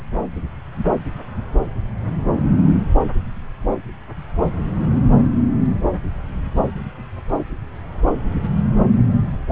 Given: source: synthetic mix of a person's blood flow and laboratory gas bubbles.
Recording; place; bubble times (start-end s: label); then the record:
Doppler ultrasound of blood flow; subclavian vein
0.00-0.03 s: bubbles
From the record:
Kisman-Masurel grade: 111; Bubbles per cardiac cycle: 1 to 2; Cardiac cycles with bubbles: 1 to 10%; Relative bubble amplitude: barely perceptible (0.100 to 0.250); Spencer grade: 1 (occasional bubble signal discernible with the cardiac motion signal, with majority of cardiac periods free of bubbles); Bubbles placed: anywhere in the cardiac cycle